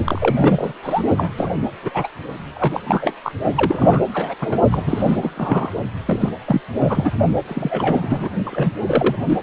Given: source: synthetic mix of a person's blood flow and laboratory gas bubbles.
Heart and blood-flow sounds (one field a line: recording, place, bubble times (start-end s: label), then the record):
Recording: Doppler ultrasound of blood flow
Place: precordium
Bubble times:
0.05-0.72 s: bubbles
0.83-1.03 s: bubbles
1.16-1.32 s: bubbles
1.37-1.51 s: bubbles
1.82-1.91 s: bubbles
1.93-2.08 s: bubbles
2.54-2.81 s: bubbles
2.87-3.15 s: bubbles
3.24-3.32 s: bubbles
3.55-4.03 s: bubbles
4.14-4.34 s: bubbles
4.41-4.61 s: bubbles
4.71-5.70 s: bubbles
6.07-6.29 s: bubbles
6.45-6.61 s: bubbles
6.75-7.12 s: bubbles
7.48-8.29 s: bubbles
8.46-8.73 s: bubbles
8.86-9.15 s: bubbles
9.26-9.38 s: bubbles
From the record:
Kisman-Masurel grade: 343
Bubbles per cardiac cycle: rolling drumbeat, 9 or more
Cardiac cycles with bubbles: 100%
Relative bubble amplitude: loud (0.450 to 0.775)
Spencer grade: 3 (all of the cardiac periods contain showers or single bubble signals, but not dominating or overriding the cardiac motion signals)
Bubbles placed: only in the low amplitude regions of the cardiac cycle